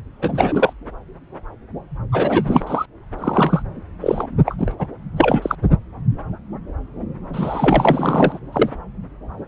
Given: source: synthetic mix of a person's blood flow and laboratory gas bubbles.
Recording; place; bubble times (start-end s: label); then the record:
Doppler ultrasound of blood flow; subclavian vein
0.22-0.73 s: bubbles
2.12-2.86 s: bubbles
3.19-3.62 s: bubbles
4.00-4.26 s: bubbles
4.46-4.74 s: bubbles
4.79-4.87 s: bubbles
5.17-5.55 s: bubbles
7.33-8.40 s: bubbles
8.52-8.70 s: bubbles
From the record:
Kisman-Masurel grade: 333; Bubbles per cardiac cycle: rolling drumbeat, 9 or more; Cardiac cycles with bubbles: 50 to 99%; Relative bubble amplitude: loud (0.450 to 0.775); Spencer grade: 3 (all of the cardiac periods contain showers or single bubble signals, but not dominating or overriding the cardiac motion signals); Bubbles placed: anywhere in the cardiac cycle